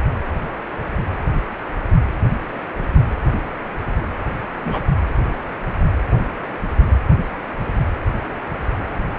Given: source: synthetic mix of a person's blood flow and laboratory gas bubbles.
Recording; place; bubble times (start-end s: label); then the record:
Doppler ultrasound of blood flow; precordium
4.65-4.83 s: bubbles
From the record:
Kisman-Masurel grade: 112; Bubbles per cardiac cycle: 1 to 2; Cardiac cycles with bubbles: 1 to 10%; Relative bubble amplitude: moderate (0.250 to 0.450); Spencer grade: 1 (occasional bubble signal discernible with the cardiac motion signal, with majority of cardiac periods free of bubbles); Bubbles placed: anywhere in the cardiac cycle